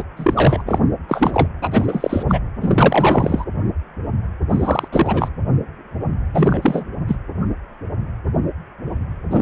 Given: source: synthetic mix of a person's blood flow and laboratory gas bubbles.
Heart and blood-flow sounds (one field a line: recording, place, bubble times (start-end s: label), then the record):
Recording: Doppler ultrasound of blood flow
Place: precordium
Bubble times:
0.00-0.03 s: bubbles
0.17-0.63 s: bubbles
0.66-0.80 s: bubbles
1.08-1.48 s: bubbles
1.61-2.23 s: bubbles
2.28-2.40 s: bubbles
2.61-3.44 s: bubbles
4.50-4.88 s: bubbles
4.92-5.29 s: bubbles
6.33-6.85 s: bubbles
7.08-7.16 s: bubbles
9.31-9.42 s: bubbles
From the record:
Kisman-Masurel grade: 333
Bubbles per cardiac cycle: rolling drumbeat, 9 or more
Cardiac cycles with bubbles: 50 to 99%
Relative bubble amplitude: loud (0.450 to 0.775)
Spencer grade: 3 (all of the cardiac periods contain showers or single bubble signals, but not dominating or overriding the cardiac motion signals)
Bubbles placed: anywhere in the cardiac cycle